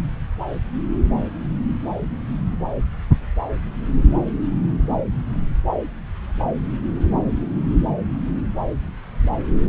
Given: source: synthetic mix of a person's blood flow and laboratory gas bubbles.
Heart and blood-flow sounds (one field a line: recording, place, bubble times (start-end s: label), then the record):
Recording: Doppler ultrasound of blood flow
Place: subclavian vein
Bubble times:
no bubbles
From the record:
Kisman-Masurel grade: 000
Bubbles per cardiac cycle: 0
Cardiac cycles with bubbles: 0%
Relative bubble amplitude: no bubbles discernible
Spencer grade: 0 (complete lack of bubble signals)